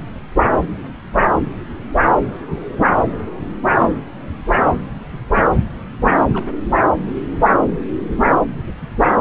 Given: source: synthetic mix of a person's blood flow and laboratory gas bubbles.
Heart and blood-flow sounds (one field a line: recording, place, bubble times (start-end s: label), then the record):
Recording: Doppler ultrasound of blood flow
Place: subclavian vein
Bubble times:
3.79-3.90 s: bubbles
6.33-6.45 s: bubbles
From the record:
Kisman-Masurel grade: 121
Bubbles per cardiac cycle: 1 to 2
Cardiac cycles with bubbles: 10 to 50%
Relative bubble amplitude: barely perceptible (0.100 to 0.250)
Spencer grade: 2 (many but less than half of the cardiac periods contain bubble signals, singularly or in groups)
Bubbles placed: anywhere in the cardiac cycle